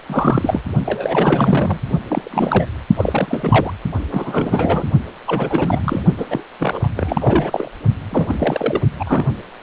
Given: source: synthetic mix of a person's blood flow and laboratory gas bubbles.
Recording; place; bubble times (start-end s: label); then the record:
Doppler ultrasound of blood flow; precordium
0.06-0.61 s: bubbles
0.85-1.80 s: bubbles
2.09-2.65 s: bubbles
2.96-3.73 s: bubbles
4.10-4.90 s: bubbles
5.27-6.03 s: bubbles
6.17-6.26 s: bubbles
6.29-6.44 s: bubbles
6.60-6.89 s: bubbles
6.96-7.69 s: bubbles
8.10-8.34 s: bubbles
8.38-8.88 s: bubbles
8.99-9.25 s: bubbles
From the record:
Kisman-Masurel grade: 342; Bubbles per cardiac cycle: rolling drumbeat, 9 or more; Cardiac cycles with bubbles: 100%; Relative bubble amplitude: moderate (0.250 to 0.450); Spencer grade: 3 (all of the cardiac periods contain showers or single bubble signals, but not dominating or overriding the cardiac motion signals); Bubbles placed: only in the low amplitude regions of the cardiac cycle